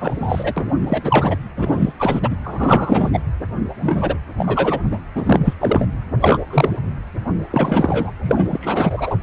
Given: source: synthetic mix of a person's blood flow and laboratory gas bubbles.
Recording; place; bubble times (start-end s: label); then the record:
Doppler ultrasound of blood flow; precordium
0.00-0.72 s: bubbles
0.81-1.36 s: bubbles
1.56-1.93 s: bubbles
1.98-2.35 s: bubbles
2.43-3.10 s: bubbles
3.12-3.20 s: bubbles
3.80-4.15 s: bubbles
4.37-4.79 s: bubbles
4.91-4.99 s: bubbles
5.15-5.54 s: bubbles
5.61-5.86 s: bubbles
6.21-6.40 s: bubbles
6.46-6.79 s: bubbles
7.50-8.12 s: bubbles
8.23-9.17 s: bubbles
From the record:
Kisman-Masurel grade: 343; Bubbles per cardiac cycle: rolling drumbeat, 9 or more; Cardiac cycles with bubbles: 100%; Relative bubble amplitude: loud (0.450 to 0.775); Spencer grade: 3 (all of the cardiac periods contain showers or single bubble signals, but not dominating or overriding the cardiac motion signals); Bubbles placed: anywhere in the cardiac cycle